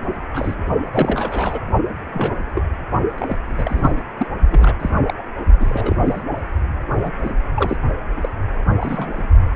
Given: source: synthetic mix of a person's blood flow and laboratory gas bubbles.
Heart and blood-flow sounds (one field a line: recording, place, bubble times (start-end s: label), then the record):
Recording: Doppler ultrasound of blood flow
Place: precordium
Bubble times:
0.34-0.55 s: bubbles
0.92-1.60 s: bubbles
2.14-2.35 s: bubbles
2.54-2.63 s: bubbles
3.18-3.38 s: bubbles
3.47-3.93 s: bubbles
3.96-4.03 s: bubbles
4.17-4.28 s: bubbles
4.50-4.75 s: bubbles
4.79-4.90 s: bubbles
5.07-5.14 s: bubbles
5.17-5.23 s: bubbles
5.60-5.96 s: bubbles
6.06-6.23 s: bubbles
6.96-7.12 s: bubbles
7.20-7.42 s: bubbles
7.56-7.78 s: bubbles
8.17-8.29 s: bubbles
8.80-9.29 s: bubbles
From the record:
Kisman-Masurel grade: 232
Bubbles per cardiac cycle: several, 3 to 8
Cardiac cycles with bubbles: 50 to 99%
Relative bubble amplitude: moderate (0.250 to 0.450)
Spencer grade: 3 (all of the cardiac periods contain showers or single bubble signals, but not dominating or overriding the cardiac motion signals)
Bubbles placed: only in the low amplitude regions of the cardiac cycle